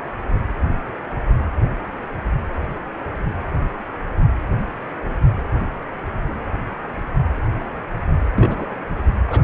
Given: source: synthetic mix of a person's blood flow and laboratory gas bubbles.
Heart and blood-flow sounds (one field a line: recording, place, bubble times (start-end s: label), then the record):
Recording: Doppler ultrasound of blood flow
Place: precordium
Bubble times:
8.36-8.76 s: bubbles
9.27-9.42 s: bubbles
From the record:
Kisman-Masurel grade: 122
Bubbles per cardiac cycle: 1 to 2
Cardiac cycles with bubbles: 10 to 50%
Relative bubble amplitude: moderate (0.250 to 0.450)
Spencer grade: 2 (many but less than half of the cardiac periods contain bubble signals, singularly or in groups)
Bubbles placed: anywhere in the cardiac cycle